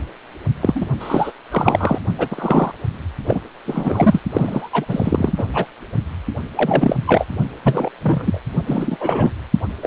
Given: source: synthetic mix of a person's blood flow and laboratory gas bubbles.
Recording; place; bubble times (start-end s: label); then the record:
Doppler ultrasound of blood flow; precordium
0.61-0.85 s: bubbles
0.99-1.32 s: bubbles
1.50-1.99 s: bubbles
2.17-2.71 s: bubbles
3.25-3.40 s: bubbles
3.65-4.21 s: bubbles
4.32-4.70 s: bubbles
4.72-5.33 s: bubbles
5.37-5.45 s: bubbles
5.54-5.66 s: bubbles
6.57-6.96 s: bubbles
7.07-7.28 s: bubbles
7.63-7.89 s: bubbles
8.02-8.40 s: bubbles
8.67-8.97 s: bubbles
9.00-9.30 s: bubbles
9.82-9.87 s: bubbles
From the record:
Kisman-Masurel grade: 243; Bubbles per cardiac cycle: several, 3 to 8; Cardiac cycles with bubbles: 100%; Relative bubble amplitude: loud (0.450 to 0.775); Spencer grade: 3 (all of the cardiac periods contain showers or single bubble signals, but not dominating or overriding the cardiac motion signals); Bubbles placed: only in the low amplitude regions of the cardiac cycle